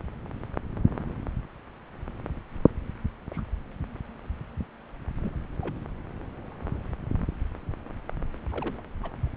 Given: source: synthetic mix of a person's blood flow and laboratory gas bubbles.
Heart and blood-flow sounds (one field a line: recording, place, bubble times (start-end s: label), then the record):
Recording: Doppler ultrasound of blood flow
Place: subclavian vein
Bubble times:
3.33-3.43 s: bubbles
5.21-5.32 s: bubbles
5.61-5.78 s: bubbles
8.51-8.86 s: bubbles
9.03-9.11 s: bubbles
From the record:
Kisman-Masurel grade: 121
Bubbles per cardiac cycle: 1 to 2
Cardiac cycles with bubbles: 10 to 50%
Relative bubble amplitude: barely perceptible (0.100 to 0.250)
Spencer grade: 2 (many but less than half of the cardiac periods contain bubble signals, singularly or in groups)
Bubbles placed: anywhere in the cardiac cycle